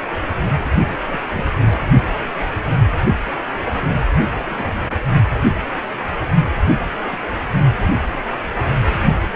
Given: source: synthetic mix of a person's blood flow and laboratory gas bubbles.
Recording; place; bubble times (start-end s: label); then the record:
Doppler ultrasound of blood flow; precordium
1.05-1.21 s: bubbles
1.29-1.44 s: bubbles
1.60-1.79 s: bubbles
4.31-4.98 s: bubbles
6.69-6.75 s: bubbles
6.78-6.85 s: bubbles
7.11-7.18 s: bubbles
From the record:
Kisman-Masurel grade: 221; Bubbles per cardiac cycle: several, 3 to 8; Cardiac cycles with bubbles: 10 to 50%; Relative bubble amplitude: barely perceptible (0.100 to 0.250); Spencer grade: 2 (many but less than half of the cardiac periods contain bubble signals, singularly or in groups); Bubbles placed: only in the low amplitude regions of the cardiac cycle